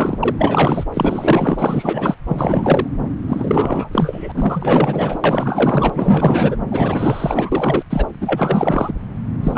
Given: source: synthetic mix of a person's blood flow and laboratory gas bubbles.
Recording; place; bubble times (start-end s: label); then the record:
Doppler ultrasound of blood flow; subclavian vein
0.00-0.83 s: bubbles
0.94-2.15 s: bubbles
2.26-2.88 s: bubbles
3.28-5.19 s: bubbles
5.24-5.90 s: bubbles
5.94-6.56 s: bubbles
6.71-7.84 s: bubbles
7.89-8.06 s: bubbles
8.20-8.93 s: bubbles
9.39-9.58 s: bubbles
From the record:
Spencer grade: 4 (maximum detectable bubble signal sounding continuously throughout systole and diastole of every cardiac period, and overriding the amplitude of the normal cardiac signals); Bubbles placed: anywhere in the cardiac cycle